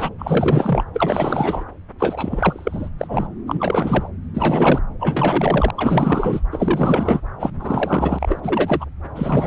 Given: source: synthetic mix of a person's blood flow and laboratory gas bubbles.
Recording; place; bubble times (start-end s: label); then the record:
Doppler ultrasound of blood flow; subclavian vein
0.00-0.09 s: bubbles
0.18-0.84 s: bubbles
0.93-1.64 s: bubbles
1.98-2.89 s: bubbles
2.98-3.27 s: bubbles
3.46-4.09 s: bubbles
4.34-4.80 s: bubbles
4.99-5.71 s: bubbles
5.76-6.41 s: bubbles
6.52-7.21 s: bubbles
7.39-7.51 s: bubbles
7.58-8.86 s: bubbles
9.15-9.47 s: bubbles
From the record:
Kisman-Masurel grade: 444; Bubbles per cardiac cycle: continuous sound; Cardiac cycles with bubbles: 100%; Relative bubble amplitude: maximal (0.775 to 0.999); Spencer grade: 4 (maximum detectable bubble signal sounding continuously throughout systole and diastole of every cardiac period, and overriding the amplitude of the normal cardiac signals); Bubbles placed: anywhere in the cardiac cycle